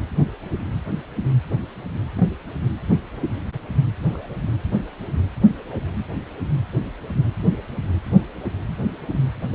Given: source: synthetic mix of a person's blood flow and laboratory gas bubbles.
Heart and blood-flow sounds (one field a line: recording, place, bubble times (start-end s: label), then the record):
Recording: Doppler ultrasound of blood flow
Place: precordium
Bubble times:
2.17-2.27 s: bubbles
4.07-4.29 s: bubbles
8.83-8.86 s: bubbles
9.09-9.20 s: bubbles
From the record:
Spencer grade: 2 (many but less than half of the cardiac periods contain bubble signals, singularly or in groups)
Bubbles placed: anywhere in the cardiac cycle